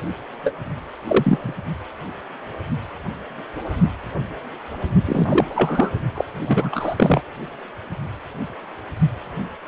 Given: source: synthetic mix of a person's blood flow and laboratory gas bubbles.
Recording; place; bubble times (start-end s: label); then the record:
Doppler ultrasound of blood flow; precordium
0.44-0.52 s: bubbles
1.08-1.55 s: bubbles
5.05-5.99 s: bubbles
6.15-6.25 s: bubbles
6.45-7.22 s: bubbles
From the record:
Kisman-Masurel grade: 223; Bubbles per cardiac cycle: several, 3 to 8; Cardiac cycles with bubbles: 10 to 50%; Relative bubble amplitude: loud (0.450 to 0.775); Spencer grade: 2 (many but less than half of the cardiac periods contain bubble signals, singularly or in groups); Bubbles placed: only in the low amplitude regions of the cardiac cycle